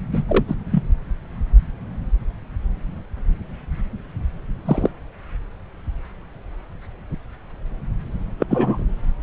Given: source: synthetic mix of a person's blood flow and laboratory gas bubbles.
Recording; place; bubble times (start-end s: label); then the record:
Doppler ultrasound of blood flow; subclavian vein
0.13-0.23 s: bubbles
0.29-0.44 s: bubbles
0.47-0.55 s: bubbles
0.71-0.83 s: bubbles
4.66-4.89 s: bubbles
8.40-8.47 s: bubbles
8.49-8.85 s: bubbles
From the record:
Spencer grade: 2 (many but less than half of the cardiac periods contain bubble signals, singularly or in groups); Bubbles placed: anywhere in the cardiac cycle